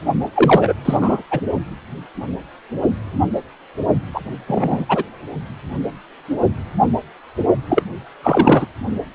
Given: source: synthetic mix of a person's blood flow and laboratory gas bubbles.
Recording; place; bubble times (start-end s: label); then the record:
Doppler ultrasound of blood flow; precordium
0.34-0.73 s: bubbles
0.85-0.97 s: bubbles
1.01-1.23 s: bubbles
1.30-1.40 s: bubbles
4.13-4.21 s: bubbles
4.46-4.85 s: bubbles
4.89-5.04 s: bubbles
7.69-7.83 s: bubbles
8.22-8.66 s: bubbles
From the record:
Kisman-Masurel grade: 233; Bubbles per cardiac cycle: several, 3 to 8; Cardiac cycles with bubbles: 50 to 99%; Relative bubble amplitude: loud (0.450 to 0.775); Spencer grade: 3 (all of the cardiac periods contain showers or single bubble signals, but not dominating or overriding the cardiac motion signals); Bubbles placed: only in the low amplitude regions of the cardiac cycle